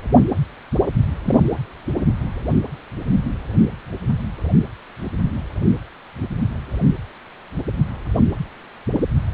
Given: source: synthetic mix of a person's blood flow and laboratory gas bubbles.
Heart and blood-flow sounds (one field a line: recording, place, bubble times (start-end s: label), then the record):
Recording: Doppler ultrasound of blood flow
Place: precordium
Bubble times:
1.24-1.40 s: bubbles
From the record:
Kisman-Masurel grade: 212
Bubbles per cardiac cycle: several, 3 to 8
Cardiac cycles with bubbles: 1 to 10%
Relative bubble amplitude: moderate (0.250 to 0.450)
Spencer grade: 1 (occasional bubble signal discernible with the cardiac motion signal, with majority of cardiac periods free of bubbles)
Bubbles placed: anywhere in the cardiac cycle